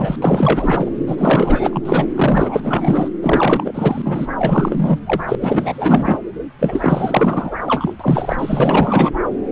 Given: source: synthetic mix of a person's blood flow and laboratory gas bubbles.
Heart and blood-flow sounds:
Doppler ultrasound of blood flow; subclavian vein
0.00-0.16 s: bubbles
0.22-0.90 s: bubbles
1.06-2.06 s: bubbles
2.15-3.08 s: bubbles
3.21-4.27 s: bubbles
4.38-5.00 s: bubbles
5.04-5.35 s: bubbles
5.41-6.18 s: bubbles
6.59-7.53 s: bubbles
7.66-7.94 s: bubbles
7.99-9.11 s: bubbles
From the record:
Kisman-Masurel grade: 444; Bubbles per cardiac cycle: continuous sound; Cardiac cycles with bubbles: 100%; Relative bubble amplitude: maximal (0.775 to 0.999); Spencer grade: 4 (maximum detectable bubble signal sounding continuously throughout systole and diastole of every cardiac period, and overriding the amplitude of the normal cardiac signals); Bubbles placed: anywhere in the cardiac cycle

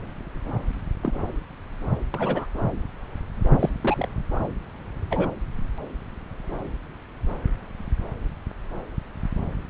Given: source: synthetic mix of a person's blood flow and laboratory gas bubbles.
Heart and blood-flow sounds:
Doppler ultrasound of blood flow; subclavian vein
0.00-0.08 s: bubbles
1.02-1.33 s: bubbles
1.89-1.98 s: bubbles
2.14-2.46 s: bubbles
3.59-3.69 s: bubbles
3.83-4.08 s: bubbles
5.11-5.29 s: bubbles
From the record:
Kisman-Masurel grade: 122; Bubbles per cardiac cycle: 1 to 2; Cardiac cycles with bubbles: 10 to 50%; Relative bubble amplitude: moderate (0.250 to 0.450); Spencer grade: 2 (many but less than half of the cardiac periods contain bubble signals, singularly or in groups); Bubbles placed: anywhere in the cardiac cycle

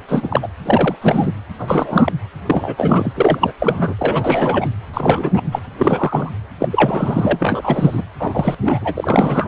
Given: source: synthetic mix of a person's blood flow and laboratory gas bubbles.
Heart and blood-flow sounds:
Doppler ultrasound of blood flow; precordium
0.09-0.48 s: bubbles
0.65-0.96 s: bubbles
1.02-1.31 s: bubbles
1.59-2.12 s: bubbles
2.46-3.12 s: bubbles
3.15-3.53 s: bubbles
3.59-3.94 s: bubbles
3.98-4.69 s: bubbles
4.93-5.42 s: bubbles
5.51-5.59 s: bubbles
5.79-6.32 s: bubbles
6.60-6.68 s: bubbles
6.71-8.04 s: bubbles
8.20-8.55 s: bubbles
8.64-8.95 s: bubbles
8.97-9.48 s: bubbles
From the record:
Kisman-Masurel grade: 343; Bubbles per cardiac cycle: rolling drumbeat, 9 or more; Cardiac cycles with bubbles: 100%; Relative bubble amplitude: loud (0.450 to 0.775); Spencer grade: 3 (all of the cardiac periods contain showers or single bubble signals, but not dominating or overriding the cardiac motion signals); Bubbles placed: anywhere in the cardiac cycle

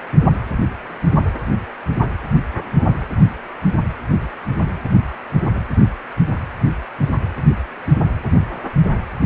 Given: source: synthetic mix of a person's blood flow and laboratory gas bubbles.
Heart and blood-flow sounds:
Doppler ultrasound of blood flow; precordium
3.21-3.26 s: bubbles
From the record:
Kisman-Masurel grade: 111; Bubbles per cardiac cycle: 1 to 2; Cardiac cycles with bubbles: 1 to 10%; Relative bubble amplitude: barely perceptible (0.100 to 0.250); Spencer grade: 1 (occasional bubble signal discernible with the cardiac motion signal, with majority of cardiac periods free of bubbles); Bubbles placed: anywhere in the cardiac cycle

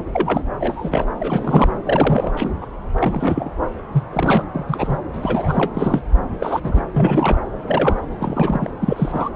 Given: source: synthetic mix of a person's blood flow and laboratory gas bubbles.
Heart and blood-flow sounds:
Doppler ultrasound of blood flow; subclavian vein
0.00-0.02 s: bubbles
0.13-0.43 s: bubbles
0.60-1.06 s: bubbles
1.20-1.78 s: bubbles
1.85-2.31 s: bubbles
2.37-2.66 s: bubbles
2.98-3.50 s: bubbles
3.92-4.03 s: bubbles
4.11-4.46 s: bubbles
4.54-4.65 s: bubbles
4.67-4.98 s: bubbles
5.13-5.71 s: bubbles
5.74-6.04 s: bubbles
6.38-6.82 s: bubbles
6.94-7.37 s: bubbles
7.61-8.00 s: bubbles
8.18-8.69 s: bubbles
8.80-9.29 s: bubbles
From the record:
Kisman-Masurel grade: 242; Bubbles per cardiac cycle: several, 3 to 8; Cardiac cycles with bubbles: 100%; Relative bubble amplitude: moderate (0.250 to 0.450); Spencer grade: 3 (all of the cardiac periods contain showers or single bubble signals, but not dominating or overriding the cardiac motion signals); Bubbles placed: anywhere in the cardiac cycle

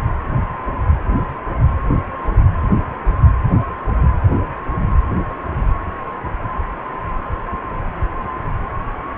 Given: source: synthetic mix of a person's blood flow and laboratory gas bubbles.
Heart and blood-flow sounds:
Doppler ultrasound of blood flow; precordium
no bubbles
From the record:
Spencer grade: 0 (complete lack of bubble signals)

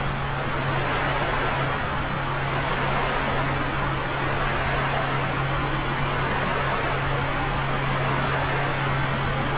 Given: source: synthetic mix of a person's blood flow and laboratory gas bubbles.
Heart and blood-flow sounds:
Doppler ultrasound of blood flow; subclavian vein
no bubbles
From the record:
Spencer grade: 0 (complete lack of bubble signals)

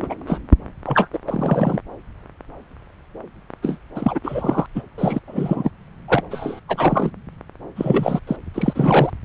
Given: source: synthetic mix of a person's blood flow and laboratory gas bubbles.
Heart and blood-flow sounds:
Doppler ultrasound of blood flow; subclavian vein
0.02-0.15 s: bubbles
0.27-0.40 s: bubbles
0.84-1.07 s: bubbles
1.13-1.19 s: bubbles
1.27-1.81 s: bubbles
3.62-3.78 s: bubbles
3.95-4.20 s: bubbles
4.23-4.66 s: bubbles
4.75-4.82 s: bubbles
4.98-5.20 s: bubbles
5.27-5.71 s: bubbles
6.08-6.23 s: bubbles
6.31-6.60 s: bubbles
6.68-7.11 s: bubbles
7.75-8.19 s: bubbles
8.27-8.37 s: bubbles
8.54-9.10 s: bubbles
From the record:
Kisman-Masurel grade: 232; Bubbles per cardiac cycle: several, 3 to 8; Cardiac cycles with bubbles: 50 to 99%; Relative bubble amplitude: moderate (0.250 to 0.450); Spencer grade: 3 (all of the cardiac periods contain showers or single bubble signals, but not dominating or overriding the cardiac motion signals); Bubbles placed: anywhere in the cardiac cycle

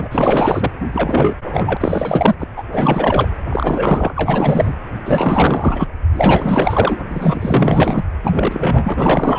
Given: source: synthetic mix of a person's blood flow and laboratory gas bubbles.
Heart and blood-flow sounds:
Doppler ultrasound of blood flow; precordium
0.00-0.08 s: bubbles
0.11-0.70 s: bubbles
0.92-1.34 s: bubbles
1.43-1.77 s: bubbles
1.80-2.35 s: bubbles
2.39-2.46 s: bubbles
2.56-2.64 s: bubbles
2.71-3.29 s: bubbles
3.50-4.12 s: bubbles
4.16-4.74 s: bubbles
5.05-5.88 s: bubbles
6.12-7.00 s: bubbles
7.10-8.04 s: bubbles
8.22-8.94 s: bubbles
8.96-9.39 s: bubbles
From the record:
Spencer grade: 4 (maximum detectable bubble signal sounding continuously throughout systole and diastole of every cardiac period, and overriding the amplitude of the normal cardiac signals); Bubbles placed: anywhere in the cardiac cycle

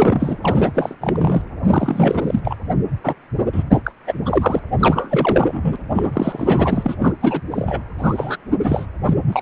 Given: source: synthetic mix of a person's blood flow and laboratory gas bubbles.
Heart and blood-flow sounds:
Doppler ultrasound of blood flow; precordium
0.00-0.37 s: bubbles
0.42-0.95 s: bubbles
1.00-1.42 s: bubbles
1.67-2.40 s: bubbles
2.44-2.56 s: bubbles
3.03-3.14 s: bubbles
3.52-3.63 s: bubbles
3.69-3.80 s: bubbles
3.84-3.92 s: bubbles
4.07-4.13 s: bubbles
4.25-4.60 s: bubbles
4.80-5.76 s: bubbles
5.91-6.96 s: bubbles
6.99-7.13 s: bubbles
7.21-7.42 s: bubbles
7.51-7.81 s: bubbles
7.98-8.38 s: bubbles
8.62-8.86 s: bubbles
9.05-9.13 s: bubbles
9.27-9.42 s: bubbles
From the record:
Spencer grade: 3 (all of the cardiac periods contain showers or single bubble signals, but not dominating or overriding the cardiac motion signals); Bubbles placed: anywhere in the cardiac cycle

